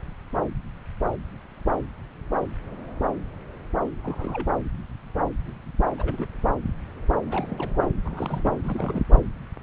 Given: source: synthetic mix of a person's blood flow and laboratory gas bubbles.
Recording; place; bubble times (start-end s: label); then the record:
Doppler ultrasound of blood flow; subclavian vein
3.86-3.90 s: bubbles
3.93-4.46 s: bubbles
5.98-6.27 s: bubbles
7.27-7.90 s: bubbles
8.04-8.58 s: bubbles
8.63-9.04 s: bubbles
9.13-9.19 s: bubbles
From the record:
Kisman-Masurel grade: 221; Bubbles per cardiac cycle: several, 3 to 8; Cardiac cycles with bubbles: 10 to 50%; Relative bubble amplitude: barely perceptible (0.100 to 0.250); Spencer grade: 2 (many but less than half of the cardiac periods contain bubble signals, singularly or in groups); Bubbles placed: anywhere in the cardiac cycle